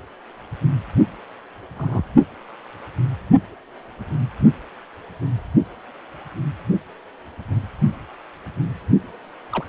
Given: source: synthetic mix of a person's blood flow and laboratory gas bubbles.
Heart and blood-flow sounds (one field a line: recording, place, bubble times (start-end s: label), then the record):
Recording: Doppler ultrasound of blood flow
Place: precordium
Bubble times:
1.76-2.04 s: bubbles
9.52-9.64 s: bubbles
From the record:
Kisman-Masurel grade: 121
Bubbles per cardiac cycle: 1 to 2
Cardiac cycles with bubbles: 10 to 50%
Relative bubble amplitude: barely perceptible (0.100 to 0.250)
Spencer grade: 2 (many but less than half of the cardiac periods contain bubble signals, singularly or in groups)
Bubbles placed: only in the low amplitude regions of the cardiac cycle